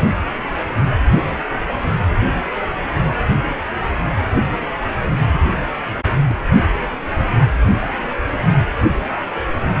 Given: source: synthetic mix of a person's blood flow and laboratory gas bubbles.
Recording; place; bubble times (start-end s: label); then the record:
Doppler ultrasound of blood flow; precordium
5.62-5.70 s: bubbles
6.27-6.37 s: bubbles
7.62-7.73 s: bubbles
From the record:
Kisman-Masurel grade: 121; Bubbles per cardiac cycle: 1 to 2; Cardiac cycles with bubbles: 10 to 50%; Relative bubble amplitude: barely perceptible (0.100 to 0.250); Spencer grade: 2 (many but less than half of the cardiac periods contain bubble signals, singularly or in groups); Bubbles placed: anywhere in the cardiac cycle